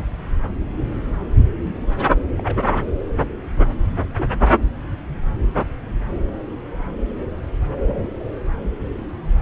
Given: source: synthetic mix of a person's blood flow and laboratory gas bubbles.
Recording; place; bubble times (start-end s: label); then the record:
Doppler ultrasound of blood flow; subclavian vein
0.00-0.03 s: bubbles
1.65-1.77 s: bubbles
2.00-2.06 s: bubbles
2.38-2.42 s: bubbles
2.45-2.60 s: bubbles
4.17-4.28 s: bubbles
4.44-4.54 s: bubbles
7.75-8.10 s: bubbles
8.63-8.67 s: bubbles
From the record:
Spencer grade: 2 (many but less than half of the cardiac periods contain bubble signals, singularly or in groups); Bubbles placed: anywhere in the cardiac cycle